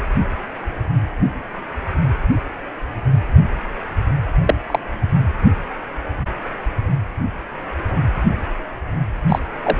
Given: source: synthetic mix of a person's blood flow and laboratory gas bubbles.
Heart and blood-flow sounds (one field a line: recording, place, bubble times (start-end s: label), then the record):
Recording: Doppler ultrasound of blood flow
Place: precordium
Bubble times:
4.46-4.54 s: bubbles
4.67-4.79 s: bubbles
9.29-9.39 s: bubbles
9.62-9.78 s: bubbles
From the record:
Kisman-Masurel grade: 123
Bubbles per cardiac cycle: 1 to 2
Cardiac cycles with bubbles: 10 to 50%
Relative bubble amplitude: loud (0.450 to 0.775)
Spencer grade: 2 (many but less than half of the cardiac periods contain bubble signals, singularly or in groups)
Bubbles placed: anywhere in the cardiac cycle